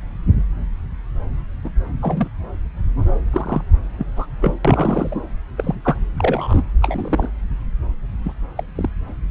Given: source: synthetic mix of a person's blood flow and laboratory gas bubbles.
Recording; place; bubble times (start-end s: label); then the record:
Doppler ultrasound of blood flow; subclavian vein
1.64-1.70 s: bubbles
2.01-2.28 s: bubbles
3.33-3.61 s: bubbles
3.98-4.07 s: bubbles
4.16-4.27 s: bubbles
4.42-4.54 s: bubbles
4.65-5.17 s: bubbles
5.58-5.75 s: bubbles
5.84-5.96 s: bubbles
6.18-6.63 s: bubbles
6.82-7.29 s: bubbles
8.23-8.34 s: bubbles
8.55-8.63 s: bubbles
8.75-8.89 s: bubbles
From the record:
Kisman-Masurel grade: 222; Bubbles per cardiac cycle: several, 3 to 8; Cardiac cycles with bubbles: 10 to 50%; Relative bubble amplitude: moderate (0.250 to 0.450); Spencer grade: 2 (many but less than half of the cardiac periods contain bubble signals, singularly or in groups); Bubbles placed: anywhere in the cardiac cycle